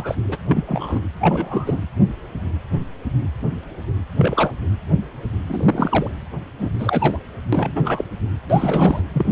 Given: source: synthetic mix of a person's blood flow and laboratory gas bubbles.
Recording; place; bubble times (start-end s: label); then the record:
Doppler ultrasound of blood flow; precordium
0.00-0.15 s: bubbles
0.28-0.36 s: bubbles
0.48-1.01 s: bubbles
1.20-1.80 s: bubbles
4.18-4.51 s: bubbles
5.46-6.10 s: bubbles
6.58-6.70 s: bubbles
6.79-7.17 s: bubbles
7.53-8.05 s: bubbles
8.49-9.01 s: bubbles
9.14-9.26 s: bubbles
From the record:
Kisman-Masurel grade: 232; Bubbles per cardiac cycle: several, 3 to 8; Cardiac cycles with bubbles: 50 to 99%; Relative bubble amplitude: moderate (0.250 to 0.450); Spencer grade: 3 (all of the cardiac periods contain showers or single bubble signals, but not dominating or overriding the cardiac motion signals); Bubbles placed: anywhere in the cardiac cycle